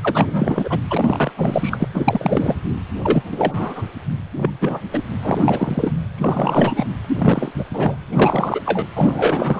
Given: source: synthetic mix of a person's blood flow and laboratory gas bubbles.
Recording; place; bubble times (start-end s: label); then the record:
Doppler ultrasound of blood flow; precordium
0.01-0.80 s: bubbles
0.90-1.32 s: bubbles
1.36-1.88 s: bubbles
1.94-2.55 s: bubbles
3.02-3.23 s: bubbles
3.30-3.86 s: bubbles
4.37-4.50 s: bubbles
4.61-4.85 s: bubbles
4.92-5.04 s: bubbles
5.23-5.91 s: bubbles
6.18-6.85 s: bubbles
7.18-7.52 s: bubbles
7.54-7.65 s: bubbles
7.73-7.97 s: bubbles
8.12-8.61 s: bubbles
8.65-8.85 s: bubbles
8.96-9.60 s: bubbles
From the record:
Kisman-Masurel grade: 343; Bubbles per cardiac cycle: rolling drumbeat, 9 or more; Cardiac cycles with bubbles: 100%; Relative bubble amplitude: loud (0.450 to 0.775); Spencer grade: 3 (all of the cardiac periods contain showers or single bubble signals, but not dominating or overriding the cardiac motion signals); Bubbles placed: anywhere in the cardiac cycle